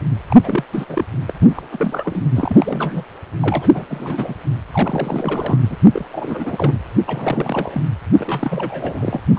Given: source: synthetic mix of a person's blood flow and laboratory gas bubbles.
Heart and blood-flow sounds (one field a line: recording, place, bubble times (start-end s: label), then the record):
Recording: Doppler ultrasound of blood flow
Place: precordium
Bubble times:
0.28-0.39 s: bubbles
0.43-0.64 s: bubbles
0.71-1.04 s: bubbles
1.27-1.33 s: bubbles
1.41-1.67 s: bubbles
1.71-2.29 s: bubbles
2.35-3.04 s: bubbles
3.40-3.70 s: bubbles
3.74-3.84 s: bubbles
3.88-4.34 s: bubbles
4.73-5.58 s: bubbles
5.70-5.78 s: bubbles
5.93-6.05 s: bubbles
6.11-6.78 s: bubbles
7.06-7.81 s: bubbles
8.12-9.21 s: bubbles
9.35-9.39 s: bubbles
From the record:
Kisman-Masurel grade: 342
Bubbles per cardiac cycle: rolling drumbeat, 9 or more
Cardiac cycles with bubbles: 100%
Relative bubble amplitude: moderate (0.250 to 0.450)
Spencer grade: 3 (all of the cardiac periods contain showers or single bubble signals, but not dominating or overriding the cardiac motion signals)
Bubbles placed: anywhere in the cardiac cycle